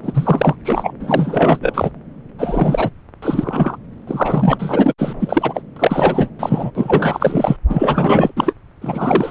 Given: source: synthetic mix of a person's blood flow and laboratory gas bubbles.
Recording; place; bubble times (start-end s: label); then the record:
Doppler ultrasound of blood flow; subclavian vein
0.03-0.55 s: bubbles
0.64-0.94 s: bubbles
1.00-1.91 s: bubbles
2.38-2.90 s: bubbles
3.22-3.77 s: bubbles
4.07-4.93 s: bubbles
4.98-5.13 s: bubbles
5.20-5.62 s: bubbles
5.76-6.29 s: bubbles
6.39-6.71 s: bubbles
6.75-7.56 s: bubbles
7.69-8.32 s: bubbles
8.36-8.54 s: bubbles
8.81-9.31 s: bubbles
From the record:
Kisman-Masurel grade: 444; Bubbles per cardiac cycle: continuous sound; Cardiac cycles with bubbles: 100%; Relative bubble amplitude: maximal (0.775 to 0.999); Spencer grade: 4 (maximum detectable bubble signal sounding continuously throughout systole and diastole of every cardiac period, and overriding the amplitude of the normal cardiac signals); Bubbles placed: anywhere in the cardiac cycle